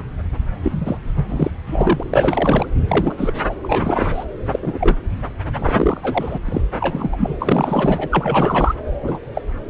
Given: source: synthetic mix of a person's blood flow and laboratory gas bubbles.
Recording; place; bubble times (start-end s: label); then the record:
Doppler ultrasound of blood flow; subclavian vein
0.62-0.97 s: bubbles
1.16-1.24 s: bubbles
1.28-1.50 s: bubbles
1.67-2.03 s: bubbles
2.10-2.67 s: bubbles
2.88-3.33 s: bubbles
3.47-3.55 s: bubbles
3.63-4.25 s: bubbles
4.46-4.59 s: bubbles
4.61-4.96 s: bubbles
5.54-6.38 s: bubbles
6.45-6.61 s: bubbles
6.80-7.36 s: bubbles
7.39-8.74 s: bubbles
9.03-9.19 s: bubbles
9.34-9.42 s: bubbles
From the record:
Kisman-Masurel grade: 233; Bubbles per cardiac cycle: several, 3 to 8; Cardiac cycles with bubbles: 50 to 99%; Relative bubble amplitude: loud (0.450 to 0.775); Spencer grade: 3 (all of the cardiac periods contain showers or single bubble signals, but not dominating or overriding the cardiac motion signals); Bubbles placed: anywhere in the cardiac cycle